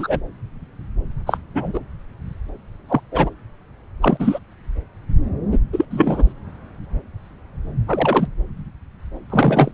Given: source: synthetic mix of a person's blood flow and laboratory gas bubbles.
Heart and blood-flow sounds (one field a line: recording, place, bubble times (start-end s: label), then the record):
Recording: Doppler ultrasound of blood flow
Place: subclavian vein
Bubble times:
0.00-0.20 s: bubbles
1.26-1.38 s: bubbles
1.55-1.81 s: bubbles
2.89-3.00 s: bubbles
3.12-3.29 s: bubbles
4.02-4.39 s: bubbles
5.51-5.58 s: bubbles
5.72-5.85 s: bubbles
5.90-6.33 s: bubbles
7.88-8.28 s: bubbles
9.30-9.71 s: bubbles
From the record:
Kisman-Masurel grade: 223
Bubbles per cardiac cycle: several, 3 to 8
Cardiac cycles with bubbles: 10 to 50%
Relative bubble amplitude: loud (0.450 to 0.775)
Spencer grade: 2 (many but less than half of the cardiac periods contain bubble signals, singularly or in groups)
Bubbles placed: anywhere in the cardiac cycle